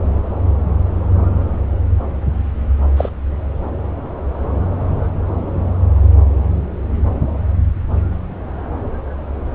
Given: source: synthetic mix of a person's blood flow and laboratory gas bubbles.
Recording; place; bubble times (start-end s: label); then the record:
Doppler ultrasound of blood flow; subclavian vein
2.97-3.09 s: bubbles
From the record:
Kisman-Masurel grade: 122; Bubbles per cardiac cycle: 1 to 2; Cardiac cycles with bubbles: 10 to 50%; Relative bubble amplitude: moderate (0.250 to 0.450); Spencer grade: 2 (many but less than half of the cardiac periods contain bubble signals, singularly or in groups); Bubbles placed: anywhere in the cardiac cycle